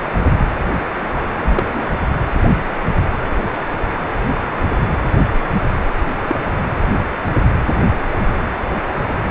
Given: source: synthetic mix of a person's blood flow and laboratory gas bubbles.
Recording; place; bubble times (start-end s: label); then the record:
Doppler ultrasound of blood flow; precordium
1.14-1.21 s: bubbles
1.36-1.89 s: bubbles
6.28-6.46 s: bubbles
From the record:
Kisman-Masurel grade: 122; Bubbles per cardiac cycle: 1 to 2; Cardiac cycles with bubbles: 10 to 50%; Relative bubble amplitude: moderate (0.250 to 0.450); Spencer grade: 2 (many but less than half of the cardiac periods contain bubble signals, singularly or in groups); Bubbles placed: anywhere in the cardiac cycle